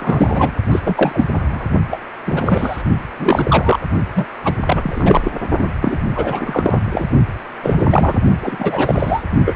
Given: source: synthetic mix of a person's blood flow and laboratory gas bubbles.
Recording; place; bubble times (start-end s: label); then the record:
Doppler ultrasound of blood flow; precordium
0.00-0.52 s: bubbles
0.71-0.80 s: bubbles
0.85-1.26 s: bubbles
1.32-1.67 s: bubbles
1.90-2.00 s: bubbles
2.26-2.82 s: bubbles
3.18-3.79 s: bubbles
4.15-4.27 s: bubbles
4.44-4.53 s: bubbles
4.66-5.32 s: bubbles
5.58-5.72 s: bubbles
5.82-5.99 s: bubbles
6.16-6.80 s: bubbles
6.93-7.07 s: bubbles
7.62-8.18 s: bubbles
8.42-9.22 s: bubbles
9.45-9.56 s: bubbles
From the record:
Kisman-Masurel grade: 343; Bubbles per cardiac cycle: rolling drumbeat, 9 or more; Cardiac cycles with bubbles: 100%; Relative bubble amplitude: loud (0.450 to 0.775); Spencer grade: 3 (all of the cardiac periods contain showers or single bubble signals, but not dominating or overriding the cardiac motion signals); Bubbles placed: only in the low amplitude regions of the cardiac cycle